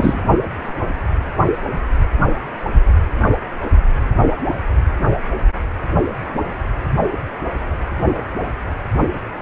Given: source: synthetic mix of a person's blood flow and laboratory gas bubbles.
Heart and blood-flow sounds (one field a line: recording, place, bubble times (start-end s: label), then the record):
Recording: Doppler ultrasound of blood flow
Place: precordium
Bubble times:
0.00-0.19 s: bubbles
From the record:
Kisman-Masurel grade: 212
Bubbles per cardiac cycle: several, 3 to 8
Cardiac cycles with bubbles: 1 to 10%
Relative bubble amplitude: moderate (0.250 to 0.450)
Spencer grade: 1 (occasional bubble signal discernible with the cardiac motion signal, with majority of cardiac periods free of bubbles)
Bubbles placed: anywhere in the cardiac cycle